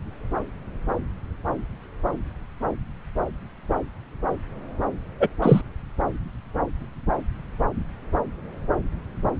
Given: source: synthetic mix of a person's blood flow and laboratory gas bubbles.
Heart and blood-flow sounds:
Doppler ultrasound of blood flow; subclavian vein
5.20-5.27 s: bubbles
5.42-5.61 s: bubbles
From the record:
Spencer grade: 2 (many but less than half of the cardiac periods contain bubble signals, singularly or in groups); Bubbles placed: anywhere in the cardiac cycle

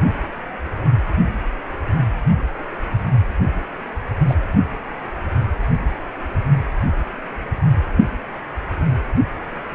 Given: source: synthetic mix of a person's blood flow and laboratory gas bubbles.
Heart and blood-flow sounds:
Doppler ultrasound of blood flow; precordium
4.27-4.35 s: bubbles
From the record:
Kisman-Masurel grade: 112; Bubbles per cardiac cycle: 1 to 2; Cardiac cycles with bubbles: 1 to 10%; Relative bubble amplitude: moderate (0.250 to 0.450); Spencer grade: 1 (occasional bubble signal discernible with the cardiac motion signal, with majority of cardiac periods free of bubbles); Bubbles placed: anywhere in the cardiac cycle

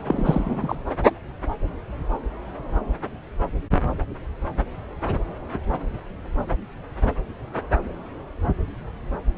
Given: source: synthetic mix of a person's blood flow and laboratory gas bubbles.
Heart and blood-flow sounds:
Doppler ultrasound of blood flow; subclavian vein
0.04-0.80 s: bubbles
From the record:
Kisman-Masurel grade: 213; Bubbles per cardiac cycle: several, 3 to 8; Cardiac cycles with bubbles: 1 to 10%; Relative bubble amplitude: loud (0.450 to 0.775); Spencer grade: 1 (occasional bubble signal discernible with the cardiac motion signal, with majority of cardiac periods free of bubbles); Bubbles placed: anywhere in the cardiac cycle

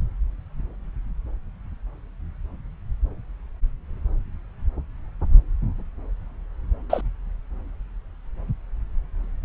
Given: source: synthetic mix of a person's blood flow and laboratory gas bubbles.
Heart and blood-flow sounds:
Doppler ultrasound of blood flow; subclavian vein
6.89-7.01 s: bubbles
From the record:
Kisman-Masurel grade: 112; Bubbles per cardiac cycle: 1 to 2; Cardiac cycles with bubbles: 1 to 10%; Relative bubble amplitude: moderate (0.250 to 0.450); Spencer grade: 1 (occasional bubble signal discernible with the cardiac motion signal, with majority of cardiac periods free of bubbles); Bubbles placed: anywhere in the cardiac cycle

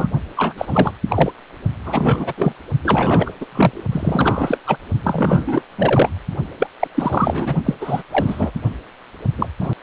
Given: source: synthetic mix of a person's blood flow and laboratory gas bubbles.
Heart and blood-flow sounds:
Doppler ultrasound of blood flow; precordium
0.00-0.07 s: bubbles
0.36-0.53 s: bubbles
0.57-0.92 s: bubbles
1.08-1.31 s: bubbles
1.85-2.33 s: bubbles
2.37-2.54 s: bubbles
2.84-3.31 s: bubbles
3.40-3.46 s: bubbles
3.51-3.83 s: bubbles
3.92-4.58 s: bubbles
4.67-4.77 s: bubbles
5.04-5.62 s: bubbles
5.78-6.09 s: bubbles
6.60-6.67 s: bubbles
6.80-6.88 s: bubbles
6.95-7.55 s: bubbles
7.65-7.75 s: bubbles
7.81-8.03 s: bubbles
8.12-8.51 s: bubbles
9.38-9.46 s: bubbles
9.60-9.73 s: bubbles
From the record:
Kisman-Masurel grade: 343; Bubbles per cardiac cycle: rolling drumbeat, 9 or more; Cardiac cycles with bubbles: 100%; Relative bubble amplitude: loud (0.450 to 0.775); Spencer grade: 3 (all of the cardiac periods contain showers or single bubble signals, but not dominating or overriding the cardiac motion signals); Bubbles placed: only in the low amplitude regions of the cardiac cycle

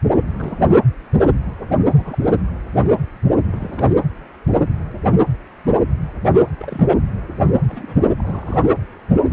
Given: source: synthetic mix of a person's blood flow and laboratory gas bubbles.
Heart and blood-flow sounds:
Doppler ultrasound of blood flow; precordium
0.34-0.60 s: bubbles
0.69-0.73 s: bubbles
1.88-2.37 s: bubbles
3.49-3.94 s: bubbles
6.58-6.96 s: bubbles
7.68-8.10 s: bubbles
8.18-8.72 s: bubbles
From the record:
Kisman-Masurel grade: 221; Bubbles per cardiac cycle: several, 3 to 8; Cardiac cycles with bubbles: 10 to 50%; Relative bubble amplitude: barely perceptible (0.100 to 0.250); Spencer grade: 2 (many but less than half of the cardiac periods contain bubble signals, singularly or in groups); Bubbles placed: anywhere in the cardiac cycle

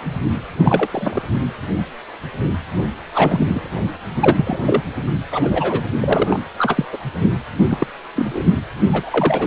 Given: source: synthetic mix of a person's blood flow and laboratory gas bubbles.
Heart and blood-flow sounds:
Doppler ultrasound of blood flow; precordium
0.58-0.88 s: bubbles
0.92-1.21 s: bubbles
3.14-3.70 s: bubbles
4.21-4.59 s: bubbles
4.66-4.82 s: bubbles
5.31-5.85 s: bubbles
6.00-6.41 s: bubbles
6.58-6.85 s: bubbles
6.92-6.98 s: bubbles
7.70-7.86 s: bubbles
8.16-8.44 s: bubbles
8.92-9.47 s: bubbles
From the record:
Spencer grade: 3 (all of the cardiac periods contain showers or single bubble signals, but not dominating or overriding the cardiac motion signals); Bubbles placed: anywhere in the cardiac cycle

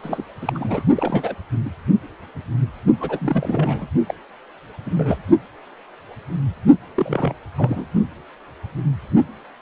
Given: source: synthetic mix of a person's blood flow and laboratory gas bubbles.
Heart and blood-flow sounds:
Doppler ultrasound of blood flow; precordium
0.03-0.24 s: bubbles
0.41-0.83 s: bubbles
0.95-1.34 s: bubbles
1.65-1.69 s: bubbles
3.00-3.88 s: bubbles
4.07-4.15 s: bubbles
4.86-4.91 s: bubbles
4.95-5.19 s: bubbles
6.95-7.33 s: bubbles
7.57-7.87 s: bubbles
From the record:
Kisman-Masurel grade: 232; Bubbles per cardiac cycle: several, 3 to 8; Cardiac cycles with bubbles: 50 to 99%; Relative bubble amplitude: moderate (0.250 to 0.450); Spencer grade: 3 (all of the cardiac periods contain showers or single bubble signals, but not dominating or overriding the cardiac motion signals); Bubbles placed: only in the low amplitude regions of the cardiac cycle

